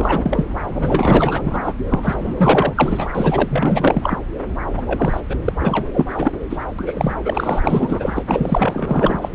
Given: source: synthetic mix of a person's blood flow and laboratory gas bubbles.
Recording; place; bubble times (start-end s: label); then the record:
Doppler ultrasound of blood flow; subclavian vein
0.00-0.45 s: bubbles
0.74-1.74 s: bubbles
1.89-2.35 s: bubbles
2.37-3.10 s: bubbles
3.15-4.17 s: bubbles
4.77-4.82 s: bubbles
4.86-5.21 s: bubbles
5.29-5.35 s: bubbles
5.44-5.52 s: bubbles
5.59-5.89 s: bubbles
5.93-6.31 s: bubbles
6.49-6.64 s: bubbles
6.78-7.13 s: bubbles
7.24-8.23 s: bubbles
8.27-9.29 s: bubbles
From the record:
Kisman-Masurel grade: 444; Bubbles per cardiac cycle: continuous sound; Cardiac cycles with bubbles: 100%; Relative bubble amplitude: maximal (0.775 to 0.999); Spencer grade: 4 (maximum detectable bubble signal sounding continuously throughout systole and diastole of every cardiac period, and overriding the amplitude of the normal cardiac signals); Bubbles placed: anywhere in the cardiac cycle